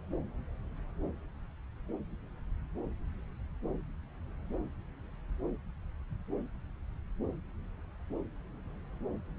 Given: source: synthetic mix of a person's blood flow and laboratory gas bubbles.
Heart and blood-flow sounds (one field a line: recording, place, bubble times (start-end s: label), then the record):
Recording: Doppler ultrasound of blood flow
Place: subclavian vein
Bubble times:
no bubbles
From the record:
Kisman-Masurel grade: 000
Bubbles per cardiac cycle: 0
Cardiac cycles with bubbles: 0%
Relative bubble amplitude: no bubbles discernible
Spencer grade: 0 (complete lack of bubble signals)